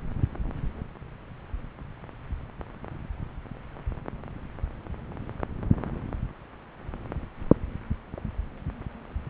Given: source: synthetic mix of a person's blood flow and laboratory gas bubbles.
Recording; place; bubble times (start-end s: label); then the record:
Doppler ultrasound of blood flow; subclavian vein
no bubbles
From the record:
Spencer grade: 0 (complete lack of bubble signals)